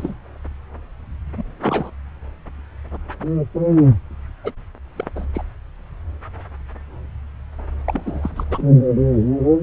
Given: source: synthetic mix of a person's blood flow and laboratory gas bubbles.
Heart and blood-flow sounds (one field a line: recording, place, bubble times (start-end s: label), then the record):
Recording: Doppler ultrasound of blood flow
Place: subclavian vein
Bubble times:
0.00-0.16 s: bubbles
1.37-1.44 s: bubbles
1.63-1.91 s: bubbles
4.43-4.52 s: bubbles
4.96-5.05 s: bubbles
5.16-5.27 s: bubbles
5.33-5.43 s: bubbles
7.86-8.63 s: bubbles
From the record:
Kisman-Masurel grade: 222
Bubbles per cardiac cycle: several, 3 to 8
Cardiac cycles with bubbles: 10 to 50%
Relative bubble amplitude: moderate (0.250 to 0.450)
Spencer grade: 2 (many but less than half of the cardiac periods contain bubble signals, singularly or in groups)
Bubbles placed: anywhere in the cardiac cycle